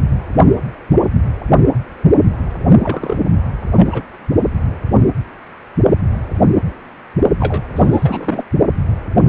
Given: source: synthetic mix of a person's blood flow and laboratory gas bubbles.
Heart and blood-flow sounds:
Doppler ultrasound of blood flow; precordium
2.83-3.18 s: bubbles
3.76-4.02 s: bubbles
7.39-7.61 s: bubbles
7.75-8.44 s: bubbles
From the record:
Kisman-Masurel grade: 222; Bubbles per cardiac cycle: several, 3 to 8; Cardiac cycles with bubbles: 10 to 50%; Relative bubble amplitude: moderate (0.250 to 0.450); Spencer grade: 2 (many but less than half of the cardiac periods contain bubble signals, singularly or in groups); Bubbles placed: only in the low amplitude regions of the cardiac cycle

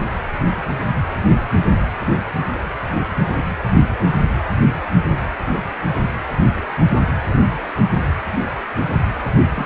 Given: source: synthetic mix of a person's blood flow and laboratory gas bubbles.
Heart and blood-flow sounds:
Doppler ultrasound of blood flow; precordium
9.54-9.66 s: bubbles
From the record:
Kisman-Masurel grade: 211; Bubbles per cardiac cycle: several, 3 to 8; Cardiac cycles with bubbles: 1 to 10%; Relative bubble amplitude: barely perceptible (0.100 to 0.250); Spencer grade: 1 (occasional bubble signal discernible with the cardiac motion signal, with majority of cardiac periods free of bubbles); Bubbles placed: anywhere in the cardiac cycle

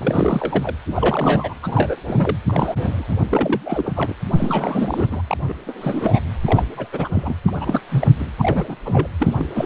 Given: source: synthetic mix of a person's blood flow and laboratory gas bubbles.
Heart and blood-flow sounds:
Doppler ultrasound of blood flow; precordium
0.00-0.74 s: bubbles
0.94-1.54 s: bubbles
1.62-1.96 s: bubbles
2.04-2.38 s: bubbles
2.46-3.06 s: bubbles
3.08-3.16 s: bubbles
3.30-4.15 s: bubbles
4.38-5.22 s: bubbles
5.28-5.38 s: bubbles
5.45-5.54 s: bubbles
5.67-6.20 s: bubbles
6.45-6.66 s: bubbles
6.74-6.90 s: bubbles
6.92-7.10 s: bubbles
7.12-7.34 s: bubbles
7.47-7.51 s: bubbles
7.61-7.80 s: bubbles
7.89-8.07 s: bubbles
8.18-8.29 s: bubbles
8.38-8.75 s: bubbles
8.85-9.07 s: bubbles
9.19-9.48 s: bubbles
9.54-9.66 s: bubbles
From the record:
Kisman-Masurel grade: 342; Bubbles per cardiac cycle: rolling drumbeat, 9 or more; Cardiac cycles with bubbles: 100%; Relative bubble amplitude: moderate (0.250 to 0.450); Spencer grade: 3 (all of the cardiac periods contain showers or single bubble signals, but not dominating or overriding the cardiac motion signals); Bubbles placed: anywhere in the cardiac cycle

